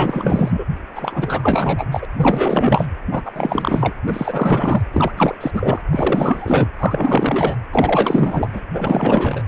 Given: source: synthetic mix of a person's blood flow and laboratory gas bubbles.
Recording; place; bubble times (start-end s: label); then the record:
Doppler ultrasound of blood flow; precordium
0.00-0.64 s: bubbles
0.95-1.85 s: bubbles
1.92-2.05 s: bubbles
2.17-2.85 s: bubbles
3.10-3.22 s: bubbles
3.25-3.32 s: bubbles
3.35-3.94 s: bubbles
4.06-4.81 s: bubbles
4.92-5.12 s: bubbles
5.17-5.35 s: bubbles
5.41-5.81 s: bubbles
5.91-6.68 s: bubbles
6.79-7.58 s: bubbles
7.72-8.61 s: bubbles
8.74-9.43 s: bubbles
From the record:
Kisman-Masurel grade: 444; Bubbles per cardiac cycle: continuous sound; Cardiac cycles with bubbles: 100%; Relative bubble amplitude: maximal (0.775 to 0.999); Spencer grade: 4 (maximum detectable bubble signal sounding continuously throughout systole and diastole of every cardiac period, and overriding the amplitude of the normal cardiac signals); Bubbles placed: anywhere in the cardiac cycle